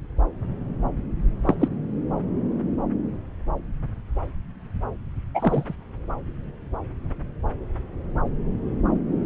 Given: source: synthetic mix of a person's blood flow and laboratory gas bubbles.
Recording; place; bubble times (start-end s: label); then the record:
Doppler ultrasound of blood flow; subclavian vein
1.45-1.55 s: bubbles
1.60-1.68 s: bubbles
5.34-5.75 s: bubbles
From the record:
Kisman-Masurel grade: 123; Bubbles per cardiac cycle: 1 to 2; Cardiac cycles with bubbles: 10 to 50%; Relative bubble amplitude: loud (0.450 to 0.775); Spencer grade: 2 (many but less than half of the cardiac periods contain bubble signals, singularly or in groups); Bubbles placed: anywhere in the cardiac cycle